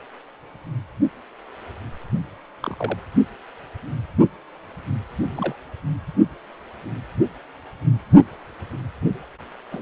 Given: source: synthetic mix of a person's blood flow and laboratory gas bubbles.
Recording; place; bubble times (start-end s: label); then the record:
Doppler ultrasound of blood flow; precordium
2.62-2.98 s: bubbles
5.30-5.56 s: bubbles
9.71-9.82 s: bubbles
From the record:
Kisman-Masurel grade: 121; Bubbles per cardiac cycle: 1 to 2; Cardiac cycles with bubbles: 10 to 50%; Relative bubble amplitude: barely perceptible (0.100 to 0.250); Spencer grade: 2 (many but less than half of the cardiac periods contain bubble signals, singularly or in groups); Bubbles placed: only in the low amplitude regions of the cardiac cycle